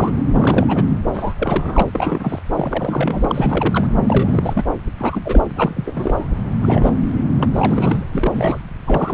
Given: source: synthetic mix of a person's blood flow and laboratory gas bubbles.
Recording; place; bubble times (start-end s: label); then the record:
Doppler ultrasound of blood flow; subclavian vein
0.00-0.23 s: bubbles
0.34-0.85 s: bubbles
1.13-1.34 s: bubbles
1.38-1.83 s: bubbles
1.94-2.39 s: bubbles
2.53-3.88 s: bubbles
4.08-4.65 s: bubbles
4.97-5.45 s: bubbles
5.56-6.27 s: bubbles
6.62-6.91 s: bubbles
7.15-7.26 s: bubbles
7.38-7.45 s: bubbles
7.54-8.04 s: bubbles
8.11-8.59 s: bubbles
8.86-9.14 s: bubbles
From the record:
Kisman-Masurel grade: 342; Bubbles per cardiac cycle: rolling drumbeat, 9 or more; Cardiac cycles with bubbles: 100%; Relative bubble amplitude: moderate (0.250 to 0.450); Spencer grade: 3 (all of the cardiac periods contain showers or single bubble signals, but not dominating or overriding the cardiac motion signals); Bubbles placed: anywhere in the cardiac cycle